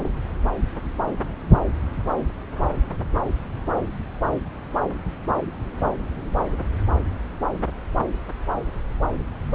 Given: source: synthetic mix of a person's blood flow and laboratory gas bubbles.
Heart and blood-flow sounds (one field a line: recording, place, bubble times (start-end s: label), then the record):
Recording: Doppler ultrasound of blood flow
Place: subclavian vein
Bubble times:
0.04-0.09 s: bubbles
From the record:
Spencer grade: 1 (occasional bubble signal discernible with the cardiac motion signal, with majority of cardiac periods free of bubbles)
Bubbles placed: anywhere in the cardiac cycle